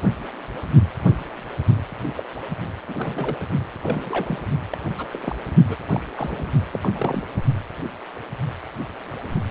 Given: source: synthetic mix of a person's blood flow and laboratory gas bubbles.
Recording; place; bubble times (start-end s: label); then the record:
Doppler ultrasound of blood flow; precordium
2.17-2.24 s: bubbles
2.88-3.38 s: bubbles
3.41-3.44 s: bubbles
3.83-4.40 s: bubbles
4.72-4.77 s: bubbles
4.97-5.08 s: bubbles
5.12-5.35 s: bubbles
5.68-5.76 s: bubbles
5.92-6.06 s: bubbles
6.17-6.53 s: bubbles
6.72-6.90 s: bubbles
6.94-7.23 s: bubbles
From the record:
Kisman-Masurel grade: 221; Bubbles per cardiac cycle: several, 3 to 8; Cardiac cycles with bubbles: 10 to 50%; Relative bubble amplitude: barely perceptible (0.100 to 0.250); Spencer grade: 2 (many but less than half of the cardiac periods contain bubble signals, singularly or in groups); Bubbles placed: only in the low amplitude regions of the cardiac cycle